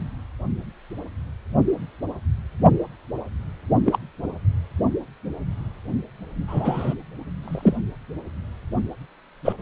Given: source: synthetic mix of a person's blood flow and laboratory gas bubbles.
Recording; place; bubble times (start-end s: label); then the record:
Doppler ultrasound of blood flow; precordium
3.85-3.99 s: bubbles
6.47-6.94 s: bubbles
7.42-7.78 s: bubbles
9.45-9.53 s: bubbles
From the record:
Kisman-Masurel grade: 123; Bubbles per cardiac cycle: 1 to 2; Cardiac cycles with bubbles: 10 to 50%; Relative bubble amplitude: loud (0.450 to 0.775); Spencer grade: 2 (many but less than half of the cardiac periods contain bubble signals, singularly or in groups); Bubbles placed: only in the low amplitude regions of the cardiac cycle